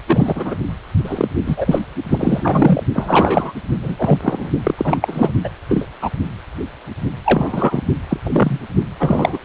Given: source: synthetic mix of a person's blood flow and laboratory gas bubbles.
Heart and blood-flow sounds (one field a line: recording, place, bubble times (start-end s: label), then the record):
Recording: Doppler ultrasound of blood flow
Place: precordium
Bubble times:
0.07-0.55 s: bubbles
1.04-1.28 s: bubbles
1.46-1.79 s: bubbles
2.09-2.83 s: bubbles
2.94-3.53 s: bubbles
3.81-4.19 s: bubbles
4.21-4.49 s: bubbles
4.63-4.74 s: bubbles
4.77-4.98 s: bubbles
5.01-5.34 s: bubbles
5.44-5.49 s: bubbles
5.69-5.86 s: bubbles
6.01-6.10 s: bubbles
7.24-7.82 s: bubbles
8.09-8.17 s: bubbles
8.23-8.59 s: bubbles
9.00-9.38 s: bubbles
From the record:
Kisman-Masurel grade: 233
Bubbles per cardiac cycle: several, 3 to 8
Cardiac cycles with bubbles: 50 to 99%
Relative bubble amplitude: loud (0.450 to 0.775)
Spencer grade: 3 (all of the cardiac periods contain showers or single bubble signals, but not dominating or overriding the cardiac motion signals)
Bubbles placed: only in the low amplitude regions of the cardiac cycle